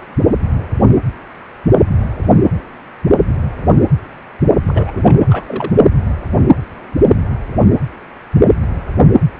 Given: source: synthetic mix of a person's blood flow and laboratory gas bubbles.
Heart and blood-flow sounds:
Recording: Doppler ultrasound of blood flow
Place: precordium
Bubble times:
4.66-4.91 s: bubbles
4.95-5.73 s: bubbles
From the record:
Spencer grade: 1 (occasional bubble signal discernible with the cardiac motion signal, with majority of cardiac periods free of bubbles)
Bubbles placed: only in the low amplitude regions of the cardiac cycle

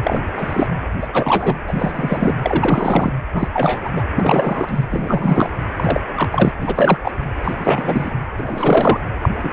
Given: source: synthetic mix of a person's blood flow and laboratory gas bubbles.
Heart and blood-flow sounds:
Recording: Doppler ultrasound of blood flow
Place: precordium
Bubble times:
0.04-0.21 s: bubbles
0.36-0.67 s: bubbles
1.01-1.07 s: bubbles
1.13-1.56 s: bubbles
1.68-2.35 s: bubbles
2.43-3.13 s: bubbles
3.33-3.48 s: bubbles
3.53-3.81 s: bubbles
3.85-3.90 s: bubbles
3.96-4.04 s: bubbles
4.17-4.84 s: bubbles
4.89-5.58 s: bubbles
5.77-6.00 s: bubbles
6.14-6.52 s: bubbles
6.61-6.97 s: bubbles
7.04-7.11 s: bubbles
7.44-8.11 s: bubbles
8.37-9.01 s: bubbles
9.22-9.29 s: bubbles
9.42-9.53 s: bubbles
From the record:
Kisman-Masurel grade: 343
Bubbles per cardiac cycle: rolling drumbeat, 9 or more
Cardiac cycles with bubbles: 100%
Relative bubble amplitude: loud (0.450 to 0.775)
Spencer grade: 3 (all of the cardiac periods contain showers or single bubble signals, but not dominating or overriding the cardiac motion signals)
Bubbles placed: anywhere in the cardiac cycle

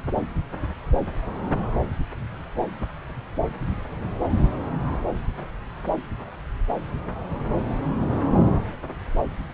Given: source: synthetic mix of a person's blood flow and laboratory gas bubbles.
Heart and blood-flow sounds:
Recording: Doppler ultrasound of blood flow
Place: subclavian vein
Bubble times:
no bubbles
From the record:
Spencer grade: 0 (complete lack of bubble signals)

